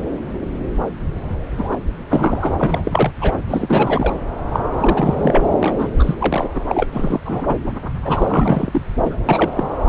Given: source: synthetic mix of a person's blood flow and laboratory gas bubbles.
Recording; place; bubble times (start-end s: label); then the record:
Doppler ultrasound of blood flow; subclavian vein
1.57-1.77 s: bubbles
2.08-2.54 s: bubbles
2.57-3.15 s: bubbles
3.21-3.32 s: bubbles
3.48-4.12 s: bubbles
4.52-4.59 s: bubbles
4.77-5.51 s: bubbles
5.60-5.76 s: bubbles
5.79-5.89 s: bubbles
5.98-6.14 s: bubbles
6.18-6.49 s: bubbles
6.54-6.60 s: bubbles
6.67-6.87 s: bubbles
6.92-7.20 s: bubbles
7.25-7.57 s: bubbles
8.04-8.81 s: bubbles
9.04-9.17 s: bubbles
9.29-9.49 s: bubbles
9.56-9.69 s: bubbles
From the record:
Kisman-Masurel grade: 333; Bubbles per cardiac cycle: rolling drumbeat, 9 or more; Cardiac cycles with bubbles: 50 to 99%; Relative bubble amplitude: loud (0.450 to 0.775); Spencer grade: 3 (all of the cardiac periods contain showers or single bubble signals, but not dominating or overriding the cardiac motion signals); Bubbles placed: anywhere in the cardiac cycle